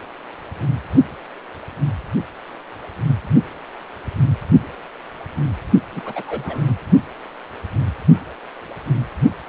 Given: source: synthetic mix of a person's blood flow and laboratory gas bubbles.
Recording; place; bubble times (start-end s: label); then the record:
Doppler ultrasound of blood flow; precordium
5.92-6.01 s: bubbles
6.05-6.75 s: bubbles
From the record:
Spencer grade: 1 (occasional bubble signal discernible with the cardiac motion signal, with majority of cardiac periods free of bubbles); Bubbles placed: only in the low amplitude regions of the cardiac cycle